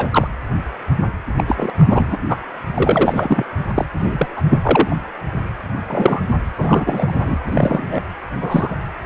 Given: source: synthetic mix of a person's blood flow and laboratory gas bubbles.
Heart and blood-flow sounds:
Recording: Doppler ultrasound of blood flow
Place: precordium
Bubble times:
0.00-0.27 s: bubbles
1.37-1.44 s: bubbles
1.47-1.70 s: bubbles
1.79-2.17 s: bubbles
2.29-2.37 s: bubbles
2.74-3.44 s: bubbles
3.75-3.86 s: bubbles
3.99-4.27 s: bubbles
4.36-4.42 s: bubbles
4.49-5.02 s: bubbles
5.88-6.21 s: bubbles
6.58-7.37 s: bubbles
7.46-8.01 s: bubbles
8.41-8.75 s: bubbles
From the record:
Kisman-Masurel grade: 243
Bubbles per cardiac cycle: several, 3 to 8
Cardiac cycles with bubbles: 100%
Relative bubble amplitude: loud (0.450 to 0.775)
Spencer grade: 3 (all of the cardiac periods contain showers or single bubble signals, but not dominating or overriding the cardiac motion signals)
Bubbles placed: anywhere in the cardiac cycle

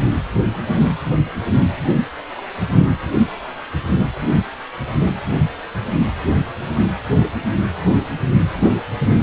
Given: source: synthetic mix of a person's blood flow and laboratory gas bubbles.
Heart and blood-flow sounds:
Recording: Doppler ultrasound of blood flow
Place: precordium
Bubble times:
2.17-2.21 s: bubbles
2.32-2.48 s: bubbles
From the record:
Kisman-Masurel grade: 111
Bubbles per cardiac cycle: 1 to 2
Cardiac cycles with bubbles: 1 to 10%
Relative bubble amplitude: barely perceptible (0.100 to 0.250)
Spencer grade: 1 (occasional bubble signal discernible with the cardiac motion signal, with majority of cardiac periods free of bubbles)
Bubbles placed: anywhere in the cardiac cycle

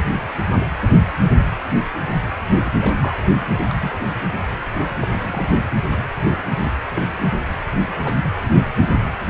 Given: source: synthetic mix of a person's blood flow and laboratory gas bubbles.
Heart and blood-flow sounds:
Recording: Doppler ultrasound of blood flow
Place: precordium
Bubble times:
2.52-2.75 s: bubbles
2.81-2.95 s: bubbles
3.00-3.16 s: bubbles
3.68-3.75 s: bubbles
3.79-3.91 s: bubbles
5.01-5.08 s: bubbles
5.21-5.49 s: bubbles
6.25-6.42 s: bubbles
6.65-6.71 s: bubbles
6.96-7.12 s: bubbles
7.92-7.98 s: bubbles
8.04-8.14 s: bubbles
From the record:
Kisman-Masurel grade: 121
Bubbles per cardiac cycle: 1 to 2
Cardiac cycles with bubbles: 10 to 50%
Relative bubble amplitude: barely perceptible (0.100 to 0.250)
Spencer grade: 2 (many but less than half of the cardiac periods contain bubble signals, singularly or in groups)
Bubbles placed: anywhere in the cardiac cycle

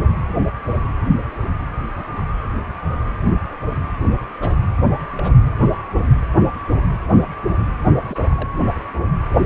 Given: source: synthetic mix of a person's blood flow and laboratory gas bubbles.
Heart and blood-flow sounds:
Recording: Doppler ultrasound of blood flow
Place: precordium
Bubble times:
1.96-2.04 s: bubbles
2.16-2.25 s: bubbles
4.42-4.55 s: bubbles
5.17-5.32 s: bubbles
8.05-8.18 s: bubbles
8.32-8.50 s: bubbles
From the record:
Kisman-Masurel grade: 121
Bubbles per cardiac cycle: 1 to 2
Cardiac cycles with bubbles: 10 to 50%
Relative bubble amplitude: barely perceptible (0.100 to 0.250)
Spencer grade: 2 (many but less than half of the cardiac periods contain bubble signals, singularly or in groups)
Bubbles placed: anywhere in the cardiac cycle

